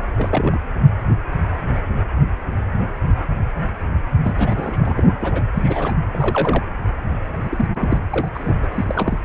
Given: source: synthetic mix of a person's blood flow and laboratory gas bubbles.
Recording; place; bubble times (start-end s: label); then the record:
Doppler ultrasound of blood flow; precordium
0.00-0.09 s: bubbles
0.16-0.58 s: bubbles
4.24-5.08 s: bubbles
5.20-5.42 s: bubbles
5.54-5.92 s: bubbles
6.12-6.63 s: bubbles
7.43-7.66 s: bubbles
7.75-8.01 s: bubbles
8.10-8.29 s: bubbles
8.34-8.55 s: bubbles
8.62-8.67 s: bubbles
8.71-9.19 s: bubbles
From the record:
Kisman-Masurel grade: 232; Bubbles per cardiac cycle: several, 3 to 8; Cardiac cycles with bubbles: 50 to 99%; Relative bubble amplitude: moderate (0.250 to 0.450); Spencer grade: 3 (all of the cardiac periods contain showers or single bubble signals, but not dominating or overriding the cardiac motion signals); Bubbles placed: anywhere in the cardiac cycle